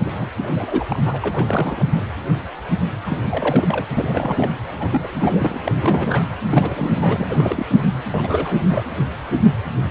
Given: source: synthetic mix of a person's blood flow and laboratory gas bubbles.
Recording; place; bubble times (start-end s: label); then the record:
Doppler ultrasound of blood flow; precordium
0.04-0.10 s: bubbles
0.19-0.26 s: bubbles
0.37-0.48 s: bubbles
0.55-0.86 s: bubbles
0.89-1.90 s: bubbles
1.94-2.01 s: bubbles
3.06-3.18 s: bubbles
3.31-3.87 s: bubbles
3.97-4.52 s: bubbles
4.75-5.60 s: bubbles
5.65-5.71 s: bubbles
5.81-6.24 s: bubbles
6.44-7.28 s: bubbles
7.30-7.66 s: bubbles
7.70-7.84 s: bubbles
8.12-8.84 s: bubbles
From the record:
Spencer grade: 3 (all of the cardiac periods contain showers or single bubble signals, but not dominating or overriding the cardiac motion signals); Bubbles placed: anywhere in the cardiac cycle